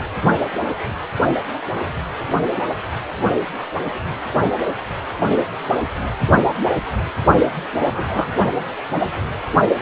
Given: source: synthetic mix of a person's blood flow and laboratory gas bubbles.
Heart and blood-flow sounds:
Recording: Doppler ultrasound of blood flow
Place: precordium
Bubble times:
7.86-8.26 s: bubbles
From the record:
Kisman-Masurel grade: 122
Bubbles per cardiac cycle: 1 to 2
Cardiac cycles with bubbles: 10 to 50%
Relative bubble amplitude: moderate (0.250 to 0.450)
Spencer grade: 2 (many but less than half of the cardiac periods contain bubble signals, singularly or in groups)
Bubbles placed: only in the low amplitude regions of the cardiac cycle

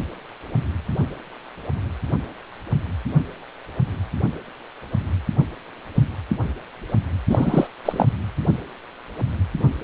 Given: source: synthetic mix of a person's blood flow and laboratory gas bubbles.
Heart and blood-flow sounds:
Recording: Doppler ultrasound of blood flow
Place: precordium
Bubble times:
7.29-7.67 s: bubbles
7.85-8.05 s: bubbles
From the record:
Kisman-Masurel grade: 223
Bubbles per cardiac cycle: several, 3 to 8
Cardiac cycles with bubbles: 10 to 50%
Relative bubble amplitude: loud (0.450 to 0.775)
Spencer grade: 2 (many but less than half of the cardiac periods contain bubble signals, singularly or in groups)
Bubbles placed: anywhere in the cardiac cycle

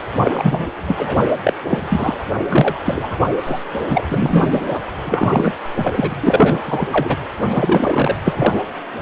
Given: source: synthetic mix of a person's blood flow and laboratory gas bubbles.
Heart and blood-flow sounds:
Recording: Doppler ultrasound of blood flow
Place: precordium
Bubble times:
0.17-0.68 s: bubbles
0.87-1.26 s: bubbles
1.44-1.53 s: bubbles
1.68-1.87 s: bubbles
1.90-2.18 s: bubbles
2.49-2.80 s: bubbles
2.87-3.18 s: bubbles
3.38-3.65 s: bubbles
3.89-4.07 s: bubbles
4.10-4.61 s: bubbles
4.66-4.82 s: bubbles
5.04-5.53 s: bubbles
5.76-6.17 s: bubbles
6.23-6.61 s: bubbles
6.65-6.88 s: bubbles
6.92-7.16 s: bubbles
7.41-8.15 s: bubbles
8.24-8.65 s: bubbles
From the record:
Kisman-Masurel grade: 333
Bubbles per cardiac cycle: rolling drumbeat, 9 or more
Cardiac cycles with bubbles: 50 to 99%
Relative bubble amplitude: loud (0.450 to 0.775)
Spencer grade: 3 (all of the cardiac periods contain showers or single bubble signals, but not dominating or overriding the cardiac motion signals)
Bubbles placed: anywhere in the cardiac cycle

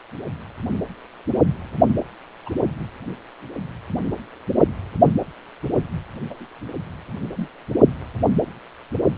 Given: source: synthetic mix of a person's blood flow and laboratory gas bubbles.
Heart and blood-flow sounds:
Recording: Doppler ultrasound of blood flow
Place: precordium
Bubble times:
2.46-2.50 s: bubbles
6.29-6.46 s: bubbles
7.37-7.48 s: bubbles
From the record:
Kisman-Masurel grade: 121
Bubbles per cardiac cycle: 1 to 2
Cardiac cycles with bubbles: 10 to 50%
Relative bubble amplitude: barely perceptible (0.100 to 0.250)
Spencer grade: 2 (many but less than half of the cardiac periods contain bubble signals, singularly or in groups)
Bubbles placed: only in the low amplitude regions of the cardiac cycle

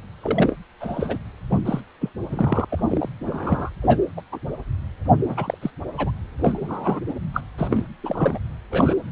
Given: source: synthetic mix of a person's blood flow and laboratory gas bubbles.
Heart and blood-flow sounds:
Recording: Doppler ultrasound of blood flow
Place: precordium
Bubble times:
0.22-0.56 s: bubbles
0.80-1.18 s: bubbles
1.50-1.60 s: bubbles
1.65-1.81 s: bubbles
2.01-2.10 s: bubbles
2.29-2.65 s: bubbles
2.69-3.10 s: bubbles
3.26-3.70 s: bubbles
3.82-4.00 s: bubbles
4.17-4.21 s: bubbles
4.32-4.39 s: bubbles
5.20-5.58 s: bubbles
5.62-5.71 s: bubbles
5.98-6.11 s: bubbles
6.38-7.00 s: bubbles
7.07-7.14 s: bubbles
7.33-7.42 s: bubbles
7.58-7.87 s: bubbles
8.03-8.39 s: bubbles
8.71-8.94 s: bubbles
From the record:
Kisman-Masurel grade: 242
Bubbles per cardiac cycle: several, 3 to 8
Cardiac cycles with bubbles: 100%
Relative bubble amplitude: moderate (0.250 to 0.450)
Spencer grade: 3 (all of the cardiac periods contain showers or single bubble signals, but not dominating or overriding the cardiac motion signals)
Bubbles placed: anywhere in the cardiac cycle

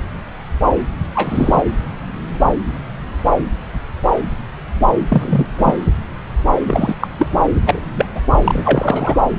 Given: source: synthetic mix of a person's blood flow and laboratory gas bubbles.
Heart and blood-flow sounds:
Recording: Doppler ultrasound of blood flow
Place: subclavian vein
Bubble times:
1.15-1.62 s: bubbles
5.08-5.46 s: bubbles
5.58-5.79 s: bubbles
6.67-6.96 s: bubbles
7.00-7.08 s: bubbles
7.18-7.28 s: bubbles
7.66-7.84 s: bubbles
7.98-8.06 s: bubbles
8.15-8.22 s: bubbles
8.44-9.18 s: bubbles
From the record:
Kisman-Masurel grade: 223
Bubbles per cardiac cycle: several, 3 to 8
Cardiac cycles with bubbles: 10 to 50%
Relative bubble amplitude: loud (0.450 to 0.775)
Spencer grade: 2 (many but less than half of the cardiac periods contain bubble signals, singularly or in groups)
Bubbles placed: anywhere in the cardiac cycle

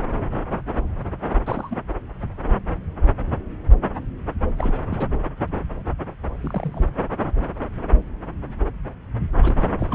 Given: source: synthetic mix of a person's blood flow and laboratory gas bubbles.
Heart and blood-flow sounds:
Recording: Doppler ultrasound of blood flow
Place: subclavian vein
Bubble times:
1.46-1.76 s: bubbles
4.57-4.82 s: bubbles
4.91-5.08 s: bubbles
6.41-6.89 s: bubbles
9.42-9.55 s: bubbles
9.59-9.64 s: bubbles
9.79-9.87 s: bubbles
9.90-9.94 s: bubbles
From the record:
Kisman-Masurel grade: 221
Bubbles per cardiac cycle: several, 3 to 8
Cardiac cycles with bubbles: 10 to 50%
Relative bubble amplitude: barely perceptible (0.100 to 0.250)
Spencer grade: 2 (many but less than half of the cardiac periods contain bubble signals, singularly or in groups)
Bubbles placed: anywhere in the cardiac cycle

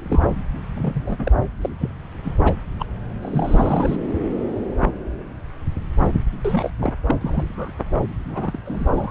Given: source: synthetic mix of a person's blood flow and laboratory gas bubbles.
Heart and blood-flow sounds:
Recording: Doppler ultrasound of blood flow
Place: subclavian vein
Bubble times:
0.00-0.33 s: bubbles
0.75-1.32 s: bubbles
1.61-1.70 s: bubbles
1.79-1.91 s: bubbles
2.24-2.35 s: bubbles
2.45-2.54 s: bubbles
2.79-2.85 s: bubbles
3.22-3.96 s: bubbles
4.79-4.96 s: bubbles
5.96-6.07 s: bubbles
6.44-6.71 s: bubbles
6.80-6.93 s: bubbles
7.06-7.15 s: bubbles
7.21-7.72 s: bubbles
8.29-8.59 s: bubbles
8.65-9.11 s: bubbles
From the record:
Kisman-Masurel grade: 242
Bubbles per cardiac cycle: several, 3 to 8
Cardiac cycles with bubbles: 100%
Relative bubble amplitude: moderate (0.250 to 0.450)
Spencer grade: 3 (all of the cardiac periods contain showers or single bubble signals, but not dominating or overriding the cardiac motion signals)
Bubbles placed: anywhere in the cardiac cycle

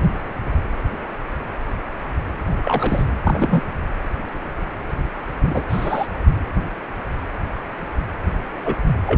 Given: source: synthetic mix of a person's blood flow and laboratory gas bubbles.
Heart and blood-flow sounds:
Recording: Doppler ultrasound of blood flow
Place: precordium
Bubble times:
2.62-3.04 s: bubbles
3.23-3.62 s: bubbles
5.43-5.64 s: bubbles
5.69-6.07 s: bubbles
8.65-8.75 s: bubbles
9.04-9.17 s: bubbles
From the record:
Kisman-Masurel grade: 123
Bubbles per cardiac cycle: 1 to 2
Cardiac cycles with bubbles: 10 to 50%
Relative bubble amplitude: loud (0.450 to 0.775)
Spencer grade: 2 (many but less than half of the cardiac periods contain bubble signals, singularly or in groups)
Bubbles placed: anywhere in the cardiac cycle

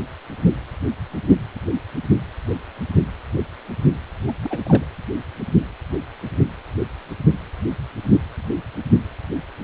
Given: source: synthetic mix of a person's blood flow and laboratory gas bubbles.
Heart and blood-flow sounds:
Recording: Doppler ultrasound of blood flow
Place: precordium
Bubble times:
4.27-4.35 s: bubbles
4.43-4.59 s: bubbles
4.66-4.84 s: bubbles
From the record:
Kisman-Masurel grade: 211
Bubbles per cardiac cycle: several, 3 to 8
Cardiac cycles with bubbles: 1 to 10%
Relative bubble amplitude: barely perceptible (0.100 to 0.250)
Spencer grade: 1 (occasional bubble signal discernible with the cardiac motion signal, with majority of cardiac periods free of bubbles)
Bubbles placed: anywhere in the cardiac cycle

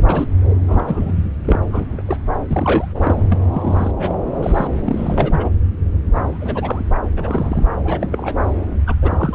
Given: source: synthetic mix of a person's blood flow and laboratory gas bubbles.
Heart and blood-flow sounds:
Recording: Doppler ultrasound of blood flow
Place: subclavian vein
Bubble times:
0.00-0.04 s: bubbles
0.08-0.28 s: bubbles
0.68-1.14 s: bubbles
1.45-1.59 s: bubbles
1.70-2.02 s: bubbles
2.06-2.18 s: bubbles
2.47-3.15 s: bubbles
3.28-3.39 s: bubbles
3.52-3.92 s: bubbles
3.99-4.27 s: bubbles
4.42-4.67 s: bubbles
4.84-5.50 s: bubbles
6.15-6.37 s: bubbles
6.40-6.85 s: bubbles
7.16-7.67 s: bubbles
7.84-8.07 s: bubbles
8.11-8.32 s: bubbles
8.86-8.95 s: bubbles
9.02-9.35 s: bubbles
From the record:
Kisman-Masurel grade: 242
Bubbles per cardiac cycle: several, 3 to 8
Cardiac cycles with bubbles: 100%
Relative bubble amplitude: moderate (0.250 to 0.450)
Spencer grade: 3 (all of the cardiac periods contain showers or single bubble signals, but not dominating or overriding the cardiac motion signals)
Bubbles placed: anywhere in the cardiac cycle

